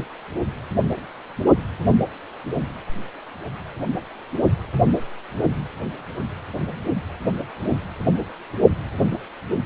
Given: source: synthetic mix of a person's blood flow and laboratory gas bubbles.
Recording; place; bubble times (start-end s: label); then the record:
Doppler ultrasound of blood flow; precordium
0.00-0.08 s: bubbles
From the record:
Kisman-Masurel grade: 112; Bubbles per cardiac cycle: 1 to 2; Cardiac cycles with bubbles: 1 to 10%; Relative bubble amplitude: moderate (0.250 to 0.450); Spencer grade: 1 (occasional bubble signal discernible with the cardiac motion signal, with majority of cardiac periods free of bubbles); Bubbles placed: only in the low amplitude regions of the cardiac cycle